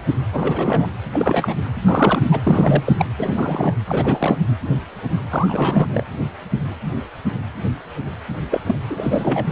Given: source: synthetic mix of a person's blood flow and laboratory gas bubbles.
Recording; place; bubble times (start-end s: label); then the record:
Doppler ultrasound of blood flow; precordium
0.32-0.88 s: bubbles
1.11-1.53 s: bubbles
1.82-2.29 s: bubbles
2.32-2.94 s: bubbles
2.98-3.06 s: bubbles
3.19-3.74 s: bubbles
3.86-4.38 s: bubbles
5.30-6.04 s: bubbles
8.51-8.59 s: bubbles
8.66-8.75 s: bubbles
8.88-9.46 s: bubbles
From the record:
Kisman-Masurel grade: 332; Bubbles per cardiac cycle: rolling drumbeat, 9 or more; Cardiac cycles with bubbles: 50 to 99%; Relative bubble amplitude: moderate (0.250 to 0.450); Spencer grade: 3 (all of the cardiac periods contain showers or single bubble signals, but not dominating or overriding the cardiac motion signals); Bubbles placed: anywhere in the cardiac cycle